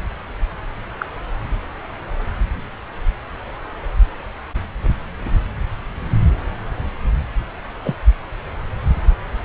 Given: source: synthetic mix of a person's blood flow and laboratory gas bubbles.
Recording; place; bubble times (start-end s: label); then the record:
Doppler ultrasound of blood flow; subclavian vein
0.99-1.06 s: bubbles
5.25-5.30 s: bubbles
7.82-7.96 s: bubbles
From the record:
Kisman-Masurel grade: 122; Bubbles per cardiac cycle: 1 to 2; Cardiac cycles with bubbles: 10 to 50%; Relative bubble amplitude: moderate (0.250 to 0.450); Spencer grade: 2 (many but less than half of the cardiac periods contain bubble signals, singularly or in groups); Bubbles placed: anywhere in the cardiac cycle